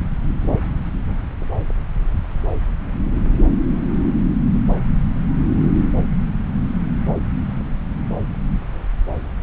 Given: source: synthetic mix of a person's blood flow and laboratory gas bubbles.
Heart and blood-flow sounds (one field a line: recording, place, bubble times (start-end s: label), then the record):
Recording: Doppler ultrasound of blood flow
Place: subclavian vein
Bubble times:
no bubbles
From the record:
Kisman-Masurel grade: 000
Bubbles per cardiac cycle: 0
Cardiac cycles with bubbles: 0%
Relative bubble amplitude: no bubbles discernible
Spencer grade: 0 (complete lack of bubble signals)